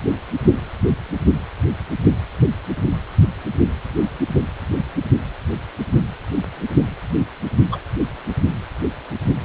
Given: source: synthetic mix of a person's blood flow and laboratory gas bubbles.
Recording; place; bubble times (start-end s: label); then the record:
Doppler ultrasound of blood flow; precordium
7.71-7.78 s: bubbles
From the record:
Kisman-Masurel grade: 113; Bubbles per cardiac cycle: 1 to 2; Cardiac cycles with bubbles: 1 to 10%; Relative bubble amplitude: loud (0.450 to 0.775); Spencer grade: 1 (occasional bubble signal discernible with the cardiac motion signal, with majority of cardiac periods free of bubbles); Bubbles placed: only in the low amplitude regions of the cardiac cycle